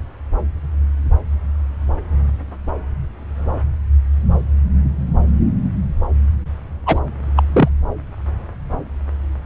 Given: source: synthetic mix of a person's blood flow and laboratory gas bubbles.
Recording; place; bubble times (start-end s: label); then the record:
Doppler ultrasound of blood flow; subclavian vein
6.86-7.00 s: bubbles
7.37-7.42 s: bubbles
7.53-7.68 s: bubbles
From the record:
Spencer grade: 2 (many but less than half of the cardiac periods contain bubble signals, singularly or in groups); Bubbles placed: anywhere in the cardiac cycle